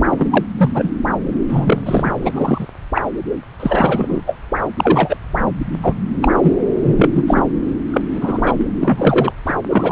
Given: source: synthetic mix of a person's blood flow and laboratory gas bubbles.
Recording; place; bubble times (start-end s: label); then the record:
Doppler ultrasound of blood flow; subclavian vein
0.10-0.45 s: bubbles
0.57-0.71 s: bubbles
0.74-0.91 s: bubbles
1.48-1.82 s: bubbles
1.85-2.12 s: bubbles
2.22-2.68 s: bubbles
2.95-3.02 s: bubbles
3.60-4.21 s: bubbles
4.27-4.36 s: bubbles
4.77-5.17 s: bubbles
5.83-5.95 s: bubbles
6.22-6.54 s: bubbles
6.83-7.24 s: bubbles
7.27-7.45 s: bubbles
7.91-8.02 s: bubbles
8.13-8.67 s: bubbles
8.80-9.33 s: bubbles
9.46-9.54 s: bubbles
9.70-9.92 s: bubbles
From the record:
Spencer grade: 3 (all of the cardiac periods contain showers or single bubble signals, but not dominating or overriding the cardiac motion signals); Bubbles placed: anywhere in the cardiac cycle